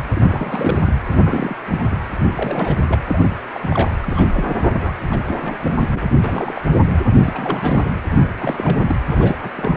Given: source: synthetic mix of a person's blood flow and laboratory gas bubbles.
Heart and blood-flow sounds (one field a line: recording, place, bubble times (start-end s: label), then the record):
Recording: Doppler ultrasound of blood flow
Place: precordium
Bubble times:
0.15-0.81 s: bubbles
0.86-0.95 s: bubbles
1.09-1.57 s: bubbles
1.71-1.79 s: bubbles
1.82-1.97 s: bubbles
2.12-2.76 s: bubbles
2.83-2.99 s: bubbles
3.08-3.36 s: bubbles
3.54-3.91 s: bubbles
4.02-4.71 s: bubbles
4.82-4.92 s: bubbles
5.11-5.20 s: bubbles
5.26-5.58 s: bubbles
5.63-5.77 s: bubbles
5.81-6.02 s: bubbles
6.15-6.17 s: bubbles
6.22-6.62 s: bubbles
7.23-7.91 s: bubbles
8.11-8.29 s: bubbles
8.39-8.78 s: bubbles
8.87-8.96 s: bubbles
9.09-9.37 s: bubbles
9.43-9.50 s: bubbles
9.55-9.77 s: bubbles
From the record:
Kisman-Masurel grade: 342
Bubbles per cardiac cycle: rolling drumbeat, 9 or more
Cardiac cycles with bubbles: 100%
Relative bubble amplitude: moderate (0.250 to 0.450)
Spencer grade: 3 (all of the cardiac periods contain showers or single bubble signals, but not dominating or overriding the cardiac motion signals)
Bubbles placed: anywhere in the cardiac cycle